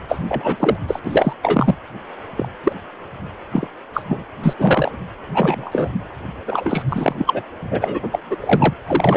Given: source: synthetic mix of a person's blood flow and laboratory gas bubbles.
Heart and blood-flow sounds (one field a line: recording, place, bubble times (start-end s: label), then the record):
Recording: Doppler ultrasound of blood flow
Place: precordium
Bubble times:
0.09-0.17 s: bubbles
0.28-0.56 s: bubbles
0.59-0.77 s: bubbles
0.88-1.00 s: bubbles
1.05-1.33 s: bubbles
1.43-1.75 s: bubbles
2.37-2.48 s: bubbles
2.64-2.73 s: bubbles
3.52-3.67 s: bubbles
3.94-4.04 s: bubbles
4.08-4.25 s: bubbles
4.42-4.53 s: bubbles
4.58-4.92 s: bubbles
5.34-5.90 s: bubbles
6.47-6.83 s: bubbles
6.88-7.15 s: bubbles
7.17-7.42 s: bubbles
7.71-8.08 s: bubbles
8.12-8.19 s: bubbles
8.29-8.36 s: bubbles
8.40-8.73 s: bubbles
8.87-9.17 s: bubbles
From the record:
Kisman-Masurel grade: 243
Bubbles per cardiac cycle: several, 3 to 8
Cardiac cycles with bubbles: 100%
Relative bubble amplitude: loud (0.450 to 0.775)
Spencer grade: 3 (all of the cardiac periods contain showers or single bubble signals, but not dominating or overriding the cardiac motion signals)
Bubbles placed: anywhere in the cardiac cycle